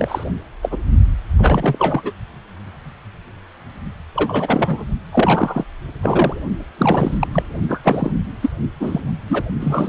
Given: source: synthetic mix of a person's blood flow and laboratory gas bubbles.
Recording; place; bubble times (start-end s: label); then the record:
Doppler ultrasound of blood flow; precordium
0.00-0.24 s: bubbles
0.62-0.77 s: bubbles
1.37-2.12 s: bubbles
4.16-4.84 s: bubbles
5.12-5.64 s: bubbles
6.03-6.41 s: bubbles
6.78-7.27 s: bubbles
7.32-7.46 s: bubbles
7.68-7.81 s: bubbles
7.83-8.12 s: bubbles
8.42-8.50 s: bubbles
8.80-9.00 s: bubbles
9.27-9.44 s: bubbles
9.60-9.89 s: bubbles
From the record:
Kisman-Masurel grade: 333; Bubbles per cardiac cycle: rolling drumbeat, 9 or more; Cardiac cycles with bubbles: 50 to 99%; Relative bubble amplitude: loud (0.450 to 0.775); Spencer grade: 3 (all of the cardiac periods contain showers or single bubble signals, but not dominating or overriding the cardiac motion signals); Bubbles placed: only in the low amplitude regions of the cardiac cycle